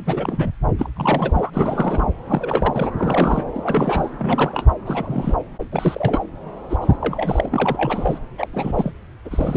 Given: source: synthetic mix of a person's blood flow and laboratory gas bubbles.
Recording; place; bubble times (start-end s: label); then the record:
Doppler ultrasound of blood flow; subclavian vein
0.05-0.51 s: bubbles
0.78-0.89 s: bubbles
0.96-1.50 s: bubbles
1.53-2.07 s: bubbles
2.28-2.91 s: bubbles
2.96-3.51 s: bubbles
3.54-4.10 s: bubbles
4.18-4.67 s: bubbles
4.86-5.34 s: bubbles
5.72-6.20 s: bubbles
6.70-6.78 s: bubbles
6.81-6.97 s: bubbles
7.00-8.19 s: bubbles
8.38-8.48 s: bubbles
8.52-8.92 s: bubbles
9.25-9.57 s: bubbles
From the record:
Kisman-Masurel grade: 342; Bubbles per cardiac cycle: rolling drumbeat, 9 or more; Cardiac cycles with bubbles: 100%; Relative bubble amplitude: moderate (0.250 to 0.450); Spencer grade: 3 (all of the cardiac periods contain showers or single bubble signals, but not dominating or overriding the cardiac motion signals); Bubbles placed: anywhere in the cardiac cycle